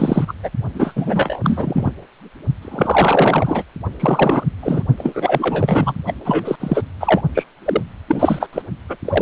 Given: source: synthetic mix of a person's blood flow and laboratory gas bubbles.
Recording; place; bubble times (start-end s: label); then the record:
Doppler ultrasound of blood flow; precordium
0.00-0.33 s: bubbles
0.43-0.50 s: bubbles
0.75-1.40 s: bubbles
1.43-1.91 s: bubbles
2.62-3.63 s: bubbles
4.00-4.44 s: bubbles
4.62-4.83 s: bubbles
4.96-5.94 s: bubbles
6.06-6.13 s: bubbles
6.25-6.55 s: bubbles
6.59-6.82 s: bubbles
7.00-7.21 s: bubbles
7.34-7.44 s: bubbles
7.64-7.82 s: bubbles
8.08-8.47 s: bubbles
8.53-8.62 s: bubbles
8.88-8.96 s: bubbles
9.04-9.22 s: bubbles
From the record:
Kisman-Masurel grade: 343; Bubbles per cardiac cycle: rolling drumbeat, 9 or more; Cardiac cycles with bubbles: 100%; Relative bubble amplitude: loud (0.450 to 0.775); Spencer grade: 3 (all of the cardiac periods contain showers or single bubble signals, but not dominating or overriding the cardiac motion signals); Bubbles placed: only in the low amplitude regions of the cardiac cycle